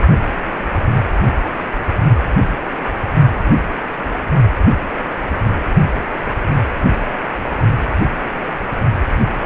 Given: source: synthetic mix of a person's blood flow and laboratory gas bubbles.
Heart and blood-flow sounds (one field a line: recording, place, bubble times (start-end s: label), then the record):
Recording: Doppler ultrasound of blood flow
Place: precordium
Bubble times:
no bubbles
From the record:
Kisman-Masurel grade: 000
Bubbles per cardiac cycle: 0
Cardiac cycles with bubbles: 0%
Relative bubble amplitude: no bubbles discernible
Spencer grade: 0 (complete lack of bubble signals)